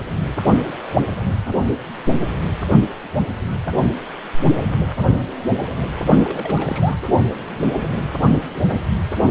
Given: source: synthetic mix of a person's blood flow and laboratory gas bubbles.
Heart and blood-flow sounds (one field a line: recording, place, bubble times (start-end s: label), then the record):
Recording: Doppler ultrasound of blood flow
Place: precordium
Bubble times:
6.22-6.95 s: bubbles
From the record:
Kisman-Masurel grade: 211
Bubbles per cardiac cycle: several, 3 to 8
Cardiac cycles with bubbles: 1 to 10%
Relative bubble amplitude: barely perceptible (0.100 to 0.250)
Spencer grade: 1 (occasional bubble signal discernible with the cardiac motion signal, with majority of cardiac periods free of bubbles)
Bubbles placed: only in the low amplitude regions of the cardiac cycle